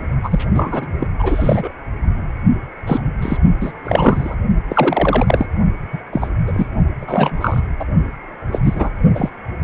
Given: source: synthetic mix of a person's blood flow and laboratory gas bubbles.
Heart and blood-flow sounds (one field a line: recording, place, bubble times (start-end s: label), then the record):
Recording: Doppler ultrasound of blood flow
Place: precordium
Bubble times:
0.23-0.45 s: bubbles
0.54-0.86 s: bubbles
0.99-1.07 s: bubbles
1.19-1.72 s: bubbles
2.86-3.01 s: bubbles
3.22-3.38 s: bubbles
3.60-3.72 s: bubbles
3.84-4.36 s: bubbles
4.69-5.46 s: bubbles
5.92-5.99 s: bubbles
6.12-6.29 s: bubbles
6.47-6.67 s: bubbles
7.00-7.60 s: bubbles
7.80-7.85 s: bubbles
8.51-8.59 s: bubbles
8.63-8.89 s: bubbles
9.14-9.29 s: bubbles
From the record:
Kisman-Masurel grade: 243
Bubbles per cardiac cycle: several, 3 to 8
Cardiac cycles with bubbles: 100%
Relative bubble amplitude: loud (0.450 to 0.775)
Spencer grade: 3 (all of the cardiac periods contain showers or single bubble signals, but not dominating or overriding the cardiac motion signals)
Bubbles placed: only in the low amplitude regions of the cardiac cycle